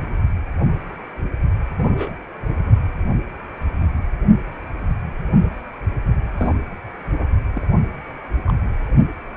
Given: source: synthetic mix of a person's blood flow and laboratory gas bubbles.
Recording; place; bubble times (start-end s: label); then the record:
Doppler ultrasound of blood flow; precordium
1.77-2.17 s: bubbles
6.37-6.55 s: bubbles
7.18-7.24 s: bubbles
7.55-7.67 s: bubbles
8.45-8.53 s: bubbles
From the record:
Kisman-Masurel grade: 121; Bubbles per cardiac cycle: 1 to 2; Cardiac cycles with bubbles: 10 to 50%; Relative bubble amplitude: barely perceptible (0.100 to 0.250); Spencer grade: 2 (many but less than half of the cardiac periods contain bubble signals, singularly or in groups); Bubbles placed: anywhere in the cardiac cycle